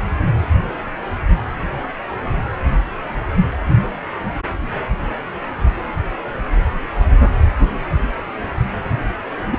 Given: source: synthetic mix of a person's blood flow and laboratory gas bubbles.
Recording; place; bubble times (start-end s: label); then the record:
Doppler ultrasound of blood flow; precordium
9.52-9.58 s: bubbles
From the record:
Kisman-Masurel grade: 112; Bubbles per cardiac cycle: 1 to 2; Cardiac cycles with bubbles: 1 to 10%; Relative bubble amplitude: moderate (0.250 to 0.450); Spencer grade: 1 (occasional bubble signal discernible with the cardiac motion signal, with majority of cardiac periods free of bubbles); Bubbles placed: anywhere in the cardiac cycle